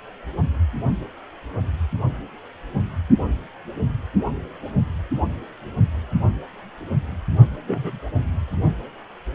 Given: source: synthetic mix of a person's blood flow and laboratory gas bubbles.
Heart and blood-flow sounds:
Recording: Doppler ultrasound of blood flow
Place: precordium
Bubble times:
7.67-7.99 s: bubbles
From the record:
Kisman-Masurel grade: 111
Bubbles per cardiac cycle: 1 to 2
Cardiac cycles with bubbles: 1 to 10%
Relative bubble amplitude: barely perceptible (0.100 to 0.250)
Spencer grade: 1 (occasional bubble signal discernible with the cardiac motion signal, with majority of cardiac periods free of bubbles)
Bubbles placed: only in the low amplitude regions of the cardiac cycle

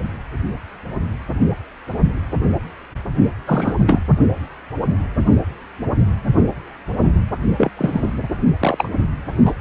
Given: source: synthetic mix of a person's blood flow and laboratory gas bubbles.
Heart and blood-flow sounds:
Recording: Doppler ultrasound of blood flow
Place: precordium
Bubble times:
3.46-3.99 s: bubbles
7.58-7.71 s: bubbles
7.77-8.12 s: bubbles
8.60-8.89 s: bubbles
9.46-9.53 s: bubbles
From the record:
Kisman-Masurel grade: 223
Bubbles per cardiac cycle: several, 3 to 8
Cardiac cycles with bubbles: 10 to 50%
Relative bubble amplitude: loud (0.450 to 0.775)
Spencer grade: 2 (many but less than half of the cardiac periods contain bubble signals, singularly or in groups)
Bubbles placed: only in the low amplitude regions of the cardiac cycle

